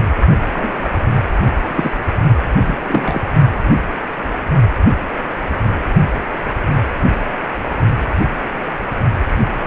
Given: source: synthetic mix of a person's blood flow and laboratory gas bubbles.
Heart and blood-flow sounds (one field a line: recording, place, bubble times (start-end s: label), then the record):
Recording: Doppler ultrasound of blood flow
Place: precordium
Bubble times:
0.53-0.88 s: bubbles
1.56-2.00 s: bubbles
2.65-3.29 s: bubbles
From the record:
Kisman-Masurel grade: 222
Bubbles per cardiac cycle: several, 3 to 8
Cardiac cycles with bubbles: 10 to 50%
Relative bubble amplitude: moderate (0.250 to 0.450)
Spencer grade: 2 (many but less than half of the cardiac periods contain bubble signals, singularly or in groups)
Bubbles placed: only in the low amplitude regions of the cardiac cycle